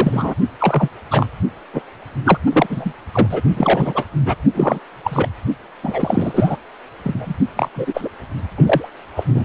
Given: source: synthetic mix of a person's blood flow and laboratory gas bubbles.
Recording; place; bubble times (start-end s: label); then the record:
Doppler ultrasound of blood flow; precordium
0.00-0.34 s: bubbles
0.60-0.89 s: bubbles
1.11-1.26 s: bubbles
1.73-1.81 s: bubbles
2.24-2.38 s: bubbles
2.52-2.67 s: bubbles
2.69-2.92 s: bubbles
3.12-3.42 s: bubbles
3.56-4.05 s: bubbles
4.25-4.35 s: bubbles
4.54-4.79 s: bubbles
5.04-5.27 s: bubbles
5.83-6.56 s: bubbles
7.03-7.38 s: bubbles
7.56-7.69 s: bubbles
7.76-8.08 s: bubbles
8.57-8.89 s: bubbles
9.16-9.23 s: bubbles
9.35-9.45 s: bubbles
From the record:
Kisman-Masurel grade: 243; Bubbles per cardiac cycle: several, 3 to 8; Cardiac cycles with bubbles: 100%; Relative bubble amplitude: loud (0.450 to 0.775); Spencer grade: 3 (all of the cardiac periods contain showers or single bubble signals, but not dominating or overriding the cardiac motion signals); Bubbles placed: only in the low amplitude regions of the cardiac cycle